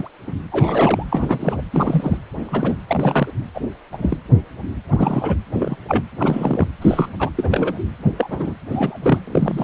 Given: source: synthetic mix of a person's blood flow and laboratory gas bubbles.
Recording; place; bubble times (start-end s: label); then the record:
Doppler ultrasound of blood flow; precordium
0.00-0.11 s: bubbles
0.28-0.35 s: bubbles
0.52-1.06 s: bubbles
1.12-1.62 s: bubbles
1.73-2.18 s: bubbles
2.45-2.78 s: bubbles
2.87-3.31 s: bubbles
3.54-3.60 s: bubbles
3.92-3.98 s: bubbles
4.01-4.17 s: bubbles
4.90-5.35 s: bubbles
5.57-5.76 s: bubbles
5.88-6.03 s: bubbles
6.17-6.67 s: bubbles
6.81-7.09 s: bubbles
7.18-7.29 s: bubbles
7.36-7.80 s: bubbles
8.18-8.54 s: bubbles
8.71-8.97 s: bubbles
9.02-9.19 s: bubbles
9.24-9.64 s: bubbles
From the record:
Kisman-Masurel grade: 232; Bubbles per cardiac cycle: several, 3 to 8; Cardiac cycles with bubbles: 50 to 99%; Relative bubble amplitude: moderate (0.250 to 0.450); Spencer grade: 3 (all of the cardiac periods contain showers or single bubble signals, but not dominating or overriding the cardiac motion signals); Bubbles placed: anywhere in the cardiac cycle